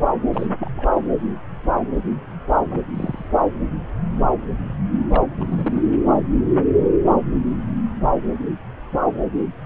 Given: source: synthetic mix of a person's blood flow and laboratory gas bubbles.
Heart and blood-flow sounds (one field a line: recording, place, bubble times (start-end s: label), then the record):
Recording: Doppler ultrasound of blood flow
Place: subclavian vein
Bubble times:
0.32-0.47 s: bubbles
0.59-0.70 s: bubbles
0.76-0.88 s: bubbles
2.70-2.81 s: bubbles
2.94-3.29 s: bubbles
5.09-5.23 s: bubbles
5.38-5.83 s: bubbles
From the record:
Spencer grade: 2 (many but less than half of the cardiac periods contain bubble signals, singularly or in groups)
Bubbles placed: anywhere in the cardiac cycle